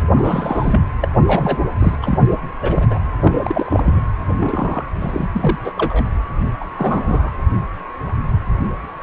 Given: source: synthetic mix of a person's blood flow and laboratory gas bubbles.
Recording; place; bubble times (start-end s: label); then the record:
Doppler ultrasound of blood flow; precordium
0.00-0.03 s: bubbles
0.15-0.81 s: bubbles
1.02-1.07 s: bubbles
1.26-1.65 s: bubbles
1.79-1.96 s: bubbles
2.02-2.18 s: bubbles
2.61-2.86 s: bubbles
2.90-2.98 s: bubbles
3.23-4.00 s: bubbles
4.40-4.83 s: bubbles
5.00-5.28 s: bubbles
5.33-5.58 s: bubbles
5.64-5.72 s: bubbles
5.77-6.04 s: bubbles
6.60-6.65 s: bubbles
6.77-7.32 s: bubbles
From the record:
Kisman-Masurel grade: 232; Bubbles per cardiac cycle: several, 3 to 8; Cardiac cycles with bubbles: 50 to 99%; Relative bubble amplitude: moderate (0.250 to 0.450); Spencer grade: 3 (all of the cardiac periods contain showers or single bubble signals, but not dominating or overriding the cardiac motion signals); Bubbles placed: anywhere in the cardiac cycle